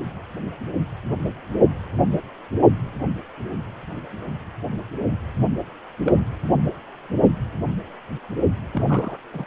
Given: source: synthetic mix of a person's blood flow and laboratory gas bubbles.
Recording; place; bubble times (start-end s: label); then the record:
Doppler ultrasound of blood flow; precordium
6.05-6.13 s: bubbles
8.72-9.18 s: bubbles
9.33-9.45 s: bubbles
From the record:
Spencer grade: 2 (many but less than half of the cardiac periods contain bubble signals, singularly or in groups); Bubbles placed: only in the low amplitude regions of the cardiac cycle